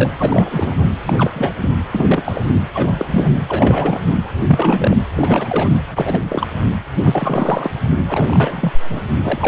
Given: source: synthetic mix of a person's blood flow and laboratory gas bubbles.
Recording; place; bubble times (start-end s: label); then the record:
Doppler ultrasound of blood flow; precordium
0.00-0.10 s: bubbles
0.18-0.84 s: bubbles
1.05-1.54 s: bubbles
1.61-1.72 s: bubbles
1.91-2.46 s: bubbles
2.51-2.61 s: bubbles
2.74-3.29 s: bubbles
3.48-4.01 s: bubbles
4.47-4.97 s: bubbles
5.15-5.77 s: bubbles
5.94-6.26 s: bubbles
6.29-6.47 s: bubbles
7.04-7.70 s: bubbles
8.09-8.73 s: bubbles
8.90-9.00 s: bubbles
9.21-9.48 s: bubbles
From the record:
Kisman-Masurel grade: 342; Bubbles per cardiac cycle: rolling drumbeat, 9 or more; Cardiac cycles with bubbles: 100%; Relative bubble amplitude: moderate (0.250 to 0.450); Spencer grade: 3 (all of the cardiac periods contain showers or single bubble signals, but not dominating or overriding the cardiac motion signals); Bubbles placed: anywhere in the cardiac cycle